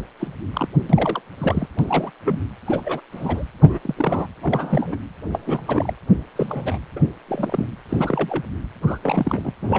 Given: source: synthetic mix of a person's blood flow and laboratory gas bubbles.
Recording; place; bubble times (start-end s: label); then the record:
Doppler ultrasound of blood flow; precordium
0.19-0.28 s: bubbles
0.53-0.68 s: bubbles
0.89-1.22 s: bubbles
1.38-1.68 s: bubbles
1.78-2.12 s: bubbles
2.25-2.40 s: bubbles
2.66-3.01 s: bubbles
3.12-3.44 s: bubbles
3.62-3.78 s: bubbles
3.82-4.27 s: bubbles
4.42-4.96 s: bubbles
5.32-5.62 s: bubbles
5.66-5.93 s: bubbles
6.35-6.78 s: bubbles
6.96-7.00 s: bubbles
7.27-7.67 s: bubbles
7.89-8.44 s: bubbles
8.82-8.99 s: bubbles
9.03-9.52 s: bubbles
9.62-9.79 s: bubbles
From the record:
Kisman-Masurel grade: 242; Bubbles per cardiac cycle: several, 3 to 8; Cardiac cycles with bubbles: 100%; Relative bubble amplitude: moderate (0.250 to 0.450); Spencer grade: 3 (all of the cardiac periods contain showers or single bubble signals, but not dominating or overriding the cardiac motion signals); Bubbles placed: anywhere in the cardiac cycle